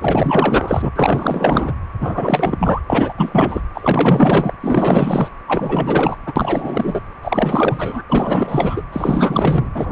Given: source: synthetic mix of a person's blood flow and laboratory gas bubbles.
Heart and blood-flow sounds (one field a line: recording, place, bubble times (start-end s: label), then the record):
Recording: Doppler ultrasound of blood flow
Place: precordium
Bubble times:
0.00-0.91 s: bubbles
0.95-1.74 s: bubbles
2.00-2.81 s: bubbles
2.90-3.14 s: bubbles
3.17-3.61 s: bubbles
3.74-4.53 s: bubbles
4.60-5.29 s: bubbles
5.47-6.16 s: bubbles
6.26-6.33 s: bubbles
6.35-7.01 s: bubbles
7.22-8.03 s: bubbles
8.08-8.83 s: bubbles
8.92-9.70 s: bubbles
9.75-9.92 s: bubbles
From the record:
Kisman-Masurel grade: 444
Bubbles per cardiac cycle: continuous sound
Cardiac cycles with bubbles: 100%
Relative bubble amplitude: maximal (0.775 to 0.999)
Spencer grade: 4 (maximum detectable bubble signal sounding continuously throughout systole and diastole of every cardiac period, and overriding the amplitude of the normal cardiac signals)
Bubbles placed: anywhere in the cardiac cycle